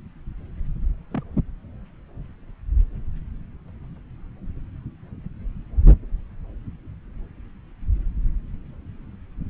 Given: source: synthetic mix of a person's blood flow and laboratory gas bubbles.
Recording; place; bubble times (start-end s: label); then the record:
Doppler ultrasound of blood flow; subclavian vein
1.11-1.23 s: bubbles
From the record:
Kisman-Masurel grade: 111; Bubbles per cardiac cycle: 1 to 2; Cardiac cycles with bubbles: 1 to 10%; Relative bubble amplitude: barely perceptible (0.100 to 0.250); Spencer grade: 1 (occasional bubble signal discernible with the cardiac motion signal, with majority of cardiac periods free of bubbles); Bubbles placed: anywhere in the cardiac cycle